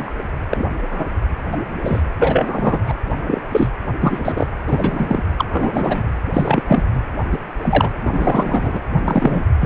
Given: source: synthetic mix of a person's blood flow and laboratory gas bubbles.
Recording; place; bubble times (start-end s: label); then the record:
Doppler ultrasound of blood flow; precordium
0.00-0.14 s: bubbles
0.18-0.22 s: bubbles
0.49-0.65 s: bubbles
0.91-1.05 s: bubbles
1.52-1.57 s: bubbles
1.84-2.01 s: bubbles
2.19-2.94 s: bubbles
3.27-3.41 s: bubbles
3.51-3.67 s: bubbles
4.00-4.47 s: bubbles
4.67-5.22 s: bubbles
5.39-5.46 s: bubbles
5.52-6.08 s: bubbles
6.33-6.62 s: bubbles
6.67-6.83 s: bubbles
7.31-7.38 s: bubbles
7.58-7.92 s: bubbles
8.02-8.79 s: bubbles
9.03-9.43 s: bubbles
9.61-9.66 s: bubbles
From the record:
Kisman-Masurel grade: 233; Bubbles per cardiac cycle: several, 3 to 8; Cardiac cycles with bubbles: 50 to 99%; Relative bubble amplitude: loud (0.450 to 0.775); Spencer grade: 3 (all of the cardiac periods contain showers or single bubble signals, but not dominating or overriding the cardiac motion signals); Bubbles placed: anywhere in the cardiac cycle